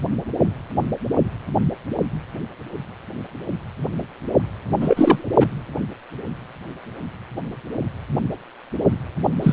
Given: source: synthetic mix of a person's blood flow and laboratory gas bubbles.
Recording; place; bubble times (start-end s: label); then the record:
Doppler ultrasound of blood flow; precordium
4.80-5.30 s: bubbles
5.39-5.46 s: bubbles
9.41-9.53 s: bubbles
From the record:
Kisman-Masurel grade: 223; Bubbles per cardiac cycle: several, 3 to 8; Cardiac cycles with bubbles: 10 to 50%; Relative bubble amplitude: loud (0.450 to 0.775); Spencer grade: 2 (many but less than half of the cardiac periods contain bubble signals, singularly or in groups); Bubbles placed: anywhere in the cardiac cycle